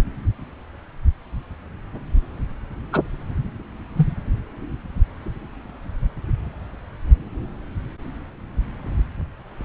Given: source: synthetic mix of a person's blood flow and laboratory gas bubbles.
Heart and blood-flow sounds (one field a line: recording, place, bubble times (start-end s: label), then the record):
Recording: Doppler ultrasound of blood flow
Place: subclavian vein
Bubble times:
2.92-3.00 s: bubbles
3.97-4.07 s: bubbles
From the record:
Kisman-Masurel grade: 113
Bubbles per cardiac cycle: 1 to 2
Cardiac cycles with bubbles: 1 to 10%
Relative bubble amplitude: loud (0.450 to 0.775)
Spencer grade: 1 (occasional bubble signal discernible with the cardiac motion signal, with majority of cardiac periods free of bubbles)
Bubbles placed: anywhere in the cardiac cycle